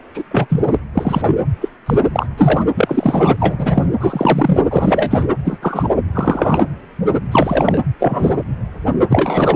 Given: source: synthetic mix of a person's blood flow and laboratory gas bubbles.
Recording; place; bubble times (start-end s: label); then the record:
Doppler ultrasound of blood flow; precordium
0.15-0.24 s: bubbles
0.31-0.47 s: bubbles
0.50-0.76 s: bubbles
0.94-1.21 s: bubbles
1.26-1.38 s: bubbles
1.61-1.69 s: bubbles
1.86-1.98 s: bubbles
2.15-2.27 s: bubbles
2.38-2.64 s: bubbles
2.74-3.37 s: bubbles
3.40-3.89 s: bubbles
4.00-4.62 s: bubbles
4.71-5.24 s: bubbles
5.45-5.58 s: bubbles
5.62-5.89 s: bubbles
6.14-6.64 s: bubbles
7.32-7.79 s: bubbles
8.00-8.35 s: bubbles
9.09-9.55 s: bubbles
From the record:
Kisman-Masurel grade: 233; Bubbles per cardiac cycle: several, 3 to 8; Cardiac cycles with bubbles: 50 to 99%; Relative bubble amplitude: loud (0.450 to 0.775); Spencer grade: 3 (all of the cardiac periods contain showers or single bubble signals, but not dominating or overriding the cardiac motion signals); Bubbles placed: anywhere in the cardiac cycle